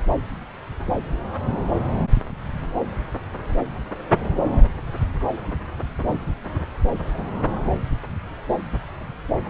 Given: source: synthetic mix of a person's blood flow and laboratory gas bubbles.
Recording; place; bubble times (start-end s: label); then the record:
Doppler ultrasound of blood flow; subclavian vein
no bubbles
From the record:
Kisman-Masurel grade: 000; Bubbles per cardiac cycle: 0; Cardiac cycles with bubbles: 0%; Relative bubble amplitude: no bubbles discernible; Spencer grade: 0 (complete lack of bubble signals)